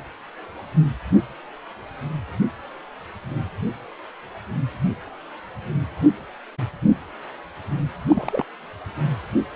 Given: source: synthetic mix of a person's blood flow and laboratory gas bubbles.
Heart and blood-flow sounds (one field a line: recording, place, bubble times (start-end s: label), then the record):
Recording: Doppler ultrasound of blood flow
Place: precordium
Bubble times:
8.06-8.45 s: bubbles
From the record:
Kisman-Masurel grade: 211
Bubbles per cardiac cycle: several, 3 to 8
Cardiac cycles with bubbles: 1 to 10%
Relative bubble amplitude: barely perceptible (0.100 to 0.250)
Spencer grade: 1 (occasional bubble signal discernible with the cardiac motion signal, with majority of cardiac periods free of bubbles)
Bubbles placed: anywhere in the cardiac cycle